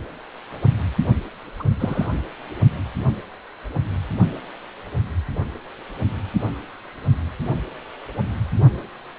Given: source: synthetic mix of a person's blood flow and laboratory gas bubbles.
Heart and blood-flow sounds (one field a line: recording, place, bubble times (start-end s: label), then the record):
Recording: Doppler ultrasound of blood flow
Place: precordium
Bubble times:
1.60-1.64 s: bubbles
1.79-2.08 s: bubbles
From the record:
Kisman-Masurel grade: 112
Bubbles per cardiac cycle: 1 to 2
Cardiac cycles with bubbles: 1 to 10%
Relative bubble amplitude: moderate (0.250 to 0.450)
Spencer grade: 1 (occasional bubble signal discernible with the cardiac motion signal, with majority of cardiac periods free of bubbles)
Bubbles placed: only in the low amplitude regions of the cardiac cycle